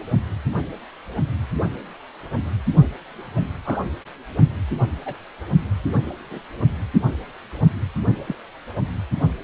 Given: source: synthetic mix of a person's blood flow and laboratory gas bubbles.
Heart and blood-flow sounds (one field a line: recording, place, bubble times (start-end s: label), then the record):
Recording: Doppler ultrasound of blood flow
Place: precordium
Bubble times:
3.64-3.79 s: bubbles
4.99-5.17 s: bubbles
6.31-6.41 s: bubbles
8.26-8.35 s: bubbles
From the record:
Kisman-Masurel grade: 121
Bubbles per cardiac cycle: 1 to 2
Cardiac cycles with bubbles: 10 to 50%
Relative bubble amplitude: barely perceptible (0.100 to 0.250)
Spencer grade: 2 (many but less than half of the cardiac periods contain bubble signals, singularly or in groups)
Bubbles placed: only in the low amplitude regions of the cardiac cycle